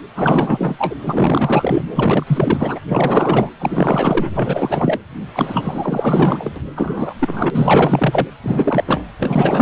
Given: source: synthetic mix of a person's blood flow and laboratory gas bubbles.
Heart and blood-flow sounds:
Doppler ultrasound of blood flow; precordium
0.15-0.95 s: bubbles
1.05-1.82 s: bubbles
1.95-2.80 s: bubbles
2.88-3.50 s: bubbles
3.59-4.30 s: bubbles
4.33-5.00 s: bubbles
5.33-6.52 s: bubbles
6.56-6.60 s: bubbles
6.76-7.14 s: bubbles
7.19-8.28 s: bubbles
8.43-8.84 s: bubbles
8.87-9.03 s: bubbles
9.20-9.62 s: bubbles
From the record:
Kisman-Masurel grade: 444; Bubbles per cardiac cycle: continuous sound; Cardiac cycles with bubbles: 100%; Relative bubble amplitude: maximal (0.775 to 0.999); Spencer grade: 4 (maximum detectable bubble signal sounding continuously throughout systole and diastole of every cardiac period, and overriding the amplitude of the normal cardiac signals); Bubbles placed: anywhere in the cardiac cycle

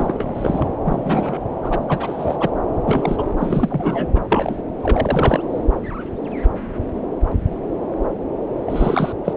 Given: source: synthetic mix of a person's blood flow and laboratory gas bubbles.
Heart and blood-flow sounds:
Doppler ultrasound of blood flow; subclavian vein
0.00-0.68 s: bubbles
0.84-1.42 s: bubbles
1.62-1.85 s: bubbles
1.88-2.37 s: bubbles
2.40-2.50 s: bubbles
2.85-3.29 s: bubbles
3.39-4.09 s: bubbles
4.14-4.20 s: bubbles
4.28-4.56 s: bubbles
4.83-5.48 s: bubbles
8.65-9.12 s: bubbles
9.24-9.33 s: bubbles
From the record:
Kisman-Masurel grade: 332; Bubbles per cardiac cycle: rolling drumbeat, 9 or more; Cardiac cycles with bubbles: 50 to 99%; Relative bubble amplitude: moderate (0.250 to 0.450); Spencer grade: 3 (all of the cardiac periods contain showers or single bubble signals, but not dominating or overriding the cardiac motion signals); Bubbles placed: anywhere in the cardiac cycle

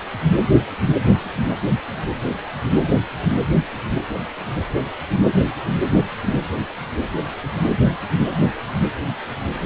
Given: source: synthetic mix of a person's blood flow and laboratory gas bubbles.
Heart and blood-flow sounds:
Doppler ultrasound of blood flow; precordium
9.64-9.66 s: bubbles
From the record:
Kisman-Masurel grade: 112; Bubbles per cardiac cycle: 1 to 2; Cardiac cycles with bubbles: 1 to 10%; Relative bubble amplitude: moderate (0.250 to 0.450); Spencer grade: 1 (occasional bubble signal discernible with the cardiac motion signal, with majority of cardiac periods free of bubbles); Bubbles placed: anywhere in the cardiac cycle

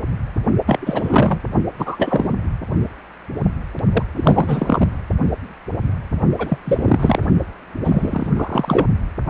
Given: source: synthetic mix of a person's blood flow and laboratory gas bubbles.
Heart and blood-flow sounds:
Doppler ultrasound of blood flow; precordium
0.66-1.40 s: bubbles
1.79-2.33 s: bubbles
3.92-4.03 s: bubbles
4.17-4.88 s: bubbles
6.38-6.58 s: bubbles
6.66-7.27 s: bubbles
7.83-8.32 s: bubbles
8.36-8.86 s: bubbles
From the record:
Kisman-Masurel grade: 333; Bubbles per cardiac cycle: rolling drumbeat, 9 or more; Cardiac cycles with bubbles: 50 to 99%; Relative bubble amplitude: loud (0.450 to 0.775); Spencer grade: 3 (all of the cardiac periods contain showers or single bubble signals, but not dominating or overriding the cardiac motion signals); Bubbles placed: only in the low amplitude regions of the cardiac cycle

